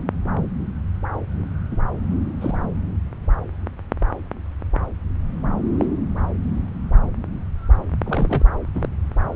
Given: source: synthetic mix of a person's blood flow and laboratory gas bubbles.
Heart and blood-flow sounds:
Doppler ultrasound of blood flow; subclavian vein
1.71-1.77 s: bubbles
2.36-2.65 s: bubbles
5.77-5.89 s: bubbles
8.04-8.46 s: bubbles
8.74-8.89 s: bubbles
From the record:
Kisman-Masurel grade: 121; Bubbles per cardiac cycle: 1 to 2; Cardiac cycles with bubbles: 10 to 50%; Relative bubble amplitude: barely perceptible (0.100 to 0.250); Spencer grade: 2 (many but less than half of the cardiac periods contain bubble signals, singularly or in groups); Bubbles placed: anywhere in the cardiac cycle

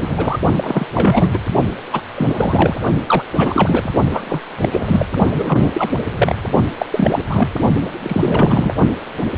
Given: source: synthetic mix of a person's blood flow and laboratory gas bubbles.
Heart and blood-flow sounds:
Doppler ultrasound of blood flow; precordium
0.00-0.38 s: bubbles
0.56-0.85 s: bubbles
0.94-1.39 s: bubbles
1.92-2.02 s: bubbles
2.15-2.79 s: bubbles
3.06-3.24 s: bubbles
3.34-3.89 s: bubbles
4.11-4.22 s: bubbles
4.25-4.40 s: bubbles
4.62-5.05 s: bubbles
5.38-5.90 s: bubbles
6.16-6.33 s: bubbles
6.79-6.86 s: bubbles
6.92-7.22 s: bubbles
7.29-7.49 s: bubbles
7.82-7.92 s: bubbles
8.02-8.74 s: bubbles
From the record:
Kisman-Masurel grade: 343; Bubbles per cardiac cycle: rolling drumbeat, 9 or more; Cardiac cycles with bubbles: 100%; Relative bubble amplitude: loud (0.450 to 0.775); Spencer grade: 3 (all of the cardiac periods contain showers or single bubble signals, but not dominating or overriding the cardiac motion signals); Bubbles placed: only in the low amplitude regions of the cardiac cycle

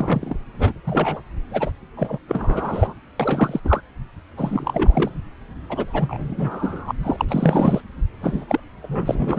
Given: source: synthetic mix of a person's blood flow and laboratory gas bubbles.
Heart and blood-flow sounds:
Doppler ultrasound of blood flow; subclavian vein
0.00-0.35 s: bubbles
0.58-0.73 s: bubbles
0.86-1.21 s: bubbles
1.51-1.71 s: bubbles
1.97-2.18 s: bubbles
2.28-2.93 s: bubbles
3.20-3.60 s: bubbles
3.65-3.81 s: bubbles
4.37-5.10 s: bubbles
5.69-6.92 s: bubbles
7.03-7.25 s: bubbles
7.29-7.82 s: bubbles
8.21-8.45 s: bubbles
8.48-8.60 s: bubbles
8.82-9.39 s: bubbles
From the record:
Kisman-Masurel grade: 342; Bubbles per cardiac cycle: rolling drumbeat, 9 or more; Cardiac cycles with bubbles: 100%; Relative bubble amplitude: moderate (0.250 to 0.450); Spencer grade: 3 (all of the cardiac periods contain showers or single bubble signals, but not dominating or overriding the cardiac motion signals); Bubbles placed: anywhere in the cardiac cycle

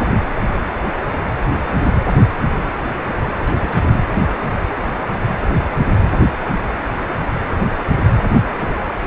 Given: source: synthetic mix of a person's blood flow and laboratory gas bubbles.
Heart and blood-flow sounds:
Doppler ultrasound of blood flow; precordium
3.42-4.04 s: bubbles
From the record:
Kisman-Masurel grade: 211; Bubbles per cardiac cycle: several, 3 to 8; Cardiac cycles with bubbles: 1 to 10%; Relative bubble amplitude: barely perceptible (0.100 to 0.250); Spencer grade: 1 (occasional bubble signal discernible with the cardiac motion signal, with majority of cardiac periods free of bubbles); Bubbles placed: anywhere in the cardiac cycle

